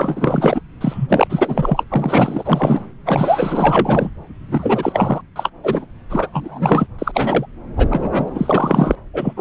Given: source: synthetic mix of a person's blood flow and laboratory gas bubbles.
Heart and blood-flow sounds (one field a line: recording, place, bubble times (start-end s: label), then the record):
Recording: Doppler ultrasound of blood flow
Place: subclavian vein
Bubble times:
0.00-0.61 s: bubbles
0.81-1.84 s: bubbles
1.90-2.82 s: bubbles
3.05-4.11 s: bubbles
4.51-5.22 s: bubbles
5.36-5.50 s: bubbles
5.63-5.86 s: bubbles
6.10-6.28 s: bubbles
6.33-6.87 s: bubbles
6.99-7.47 s: bubbles
7.76-8.96 s: bubbles
9.13-9.41 s: bubbles
From the record:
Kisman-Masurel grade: 444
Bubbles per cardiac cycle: continuous sound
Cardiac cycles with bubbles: 100%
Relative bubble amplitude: maximal (0.775 to 0.999)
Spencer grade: 4 (maximum detectable bubble signal sounding continuously throughout systole and diastole of every cardiac period, and overriding the amplitude of the normal cardiac signals)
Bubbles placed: anywhere in the cardiac cycle